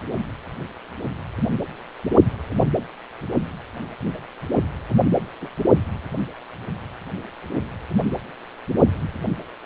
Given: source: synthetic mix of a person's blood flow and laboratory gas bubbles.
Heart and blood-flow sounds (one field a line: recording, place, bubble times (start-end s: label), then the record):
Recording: Doppler ultrasound of blood flow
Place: precordium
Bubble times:
5.41-5.48 s: bubbles
From the record:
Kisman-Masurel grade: 112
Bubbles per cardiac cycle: 1 to 2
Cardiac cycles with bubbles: 1 to 10%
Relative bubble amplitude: moderate (0.250 to 0.450)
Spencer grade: 1 (occasional bubble signal discernible with the cardiac motion signal, with majority of cardiac periods free of bubbles)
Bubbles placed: only in the low amplitude regions of the cardiac cycle